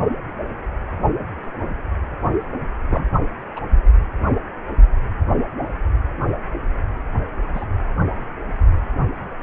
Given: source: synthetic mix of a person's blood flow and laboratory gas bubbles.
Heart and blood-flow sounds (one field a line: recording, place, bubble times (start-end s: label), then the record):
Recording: Doppler ultrasound of blood flow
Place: precordium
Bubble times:
2.89-3.05 s: bubbles
3.56-3.60 s: bubbles
7.54-7.65 s: bubbles
From the record:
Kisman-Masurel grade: 122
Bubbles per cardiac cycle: 1 to 2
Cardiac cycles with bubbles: 10 to 50%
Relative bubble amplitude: moderate (0.250 to 0.450)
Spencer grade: 2 (many but less than half of the cardiac periods contain bubble signals, singularly or in groups)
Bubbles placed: only in the low amplitude regions of the cardiac cycle